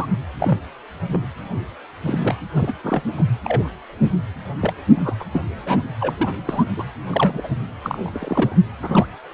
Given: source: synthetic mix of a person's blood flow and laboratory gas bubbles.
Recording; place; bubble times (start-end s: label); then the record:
Doppler ultrasound of blood flow; precordium
0.00-0.06 s: bubbles
0.40-0.58 s: bubbles
1.08-1.25 s: bubbles
2.05-2.36 s: bubbles
2.54-2.73 s: bubbles
2.83-3.02 s: bubbles
3.17-3.25 s: bubbles
3.44-3.68 s: bubbles
4.01-4.10 s: bubbles
4.61-4.74 s: bubbles
4.95-5.13 s: bubbles
5.20-5.25 s: bubbles
5.33-5.44 s: bubbles
5.66-5.83 s: bubbles
6.00-6.14 s: bubbles
6.19-6.33 s: bubbles
6.45-6.65 s: bubbles
6.77-6.83 s: bubbles
7.11-7.48 s: bubbles
7.84-8.55 s: bubbles
8.81-9.06 s: bubbles
From the record:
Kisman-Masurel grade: 242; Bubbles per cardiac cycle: several, 3 to 8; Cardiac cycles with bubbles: 100%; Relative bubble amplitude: moderate (0.250 to 0.450); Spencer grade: 3 (all of the cardiac periods contain showers or single bubble signals, but not dominating or overriding the cardiac motion signals); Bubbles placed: anywhere in the cardiac cycle